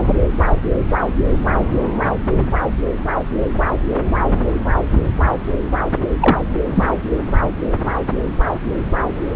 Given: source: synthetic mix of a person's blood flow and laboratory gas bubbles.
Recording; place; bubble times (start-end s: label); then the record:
Doppler ultrasound of blood flow; subclavian vein
6.20-6.38 s: bubbles
6.75-6.91 s: bubbles
From the record:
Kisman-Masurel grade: 123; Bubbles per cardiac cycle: 1 to 2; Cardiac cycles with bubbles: 10 to 50%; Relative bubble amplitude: loud (0.450 to 0.775); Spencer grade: 2 (many but less than half of the cardiac periods contain bubble signals, singularly or in groups); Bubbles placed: anywhere in the cardiac cycle